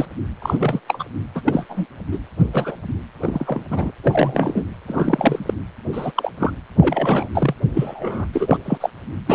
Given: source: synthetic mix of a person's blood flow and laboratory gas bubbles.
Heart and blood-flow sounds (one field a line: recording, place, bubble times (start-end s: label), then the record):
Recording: Doppler ultrasound of blood flow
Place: precordium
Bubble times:
0.00-0.05 s: bubbles
0.42-0.57 s: bubbles
0.59-0.80 s: bubbles
0.88-1.05 s: bubbles
1.35-1.42 s: bubbles
1.46-1.66 s: bubbles
1.69-1.85 s: bubbles
2.12-2.19 s: bubbles
2.40-2.43 s: bubbles
2.53-2.75 s: bubbles
3.22-3.65 s: bubbles
3.70-3.92 s: bubbles
4.04-4.67 s: bubbles
4.87-5.54 s: bubbles
5.92-6.12 s: bubbles
6.16-6.30 s: bubbles
6.40-6.51 s: bubbles
6.80-7.29 s: bubbles
7.34-7.54 s: bubbles
7.74-8.25 s: bubbles
8.33-8.57 s: bubbles
8.64-8.77 s: bubbles
8.80-8.89 s: bubbles
9.27-9.35 s: bubbles
From the record:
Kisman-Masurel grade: 242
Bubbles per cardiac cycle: several, 3 to 8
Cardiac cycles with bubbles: 100%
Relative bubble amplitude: moderate (0.250 to 0.450)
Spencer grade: 3 (all of the cardiac periods contain showers or single bubble signals, but not dominating or overriding the cardiac motion signals)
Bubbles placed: anywhere in the cardiac cycle